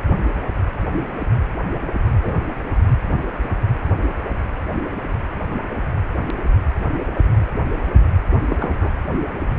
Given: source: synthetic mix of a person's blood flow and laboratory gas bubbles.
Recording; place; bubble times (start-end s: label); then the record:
Doppler ultrasound of blood flow; precordium
2.23-2.34 s: bubbles
8.50-8.91 s: bubbles
From the record:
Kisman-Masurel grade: 121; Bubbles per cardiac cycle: 1 to 2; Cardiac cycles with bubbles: 10 to 50%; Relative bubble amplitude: barely perceptible (0.100 to 0.250); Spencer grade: 2 (many but less than half of the cardiac periods contain bubble signals, singularly or in groups); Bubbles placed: anywhere in the cardiac cycle